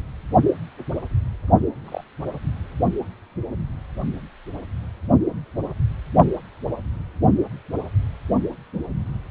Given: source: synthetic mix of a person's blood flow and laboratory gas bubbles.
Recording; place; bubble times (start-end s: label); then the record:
Doppler ultrasound of blood flow; precordium
1.84-2.04 s: bubbles
From the record:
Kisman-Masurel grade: 111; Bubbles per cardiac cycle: 1 to 2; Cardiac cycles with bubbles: 1 to 10%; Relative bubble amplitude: barely perceptible (0.100 to 0.250); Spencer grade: 1 (occasional bubble signal discernible with the cardiac motion signal, with majority of cardiac periods free of bubbles); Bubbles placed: only in the low amplitude regions of the cardiac cycle